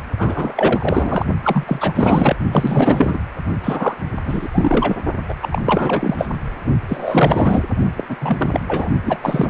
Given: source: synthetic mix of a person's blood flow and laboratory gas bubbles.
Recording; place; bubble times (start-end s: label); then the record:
Doppler ultrasound of blood flow; precordium
0.18-0.53 s: bubbles
0.55-1.25 s: bubbles
1.43-1.93 s: bubbles
1.95-2.36 s: bubbles
2.52-3.19 s: bubbles
3.63-3.94 s: bubbles
4.24-4.48 s: bubbles
4.52-4.96 s: bubbles
5.28-5.36 s: bubbles
5.42-5.61 s: bubbles
5.64-6.27 s: bubbles
6.88-7.64 s: bubbles
7.96-8.05 s: bubbles
8.08-8.16 s: bubbles
8.21-8.60 s: bubbles
8.67-8.89 s: bubbles
9.04-9.50 s: bubbles
From the record:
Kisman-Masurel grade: 444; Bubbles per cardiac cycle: continuous sound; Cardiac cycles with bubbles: 100%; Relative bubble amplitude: maximal (0.775 to 0.999); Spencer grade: 4 (maximum detectable bubble signal sounding continuously throughout systole and diastole of every cardiac period, and overriding the amplitude of the normal cardiac signals); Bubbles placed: only in the low amplitude regions of the cardiac cycle